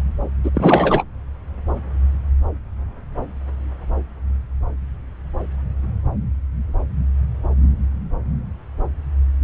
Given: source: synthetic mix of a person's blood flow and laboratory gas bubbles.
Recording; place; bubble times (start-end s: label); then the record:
Doppler ultrasound of blood flow; subclavian vein
0.43-0.51 s: bubbles
0.54-1.04 s: bubbles
From the record:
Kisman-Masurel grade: 213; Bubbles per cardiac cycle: several, 3 to 8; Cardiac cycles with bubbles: 1 to 10%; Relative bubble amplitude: loud (0.450 to 0.775); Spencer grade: 1 (occasional bubble signal discernible with the cardiac motion signal, with majority of cardiac periods free of bubbles); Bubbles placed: anywhere in the cardiac cycle